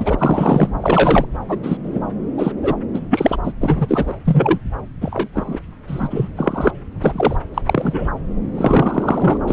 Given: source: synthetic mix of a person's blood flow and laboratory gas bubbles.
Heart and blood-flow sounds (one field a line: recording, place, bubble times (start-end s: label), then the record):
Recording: Doppler ultrasound of blood flow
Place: subclavian vein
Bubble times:
0.00-0.69 s: bubbles
0.81-1.25 s: bubbles
1.48-1.59 s: bubbles
1.63-1.77 s: bubbles
1.83-1.99 s: bubbles
2.37-2.52 s: bubbles
2.62-2.76 s: bubbles
2.93-2.99 s: bubbles
3.10-3.38 s: bubbles
3.43-3.52 s: bubbles
3.60-4.14 s: bubbles
4.25-4.58 s: bubbles
5.01-5.29 s: bubbles
5.35-5.59 s: bubbles
5.87-6.29 s: bubbles
6.36-6.72 s: bubbles
7.04-7.37 s: bubbles
7.54-7.62 s: bubbles
7.67-8.09 s: bubbles
8.54-9.38 s: bubbles
9.46-9.53 s: bubbles
From the record:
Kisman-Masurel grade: 243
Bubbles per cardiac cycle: several, 3 to 8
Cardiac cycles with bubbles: 100%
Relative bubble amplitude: loud (0.450 to 0.775)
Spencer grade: 3 (all of the cardiac periods contain showers or single bubble signals, but not dominating or overriding the cardiac motion signals)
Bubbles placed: anywhere in the cardiac cycle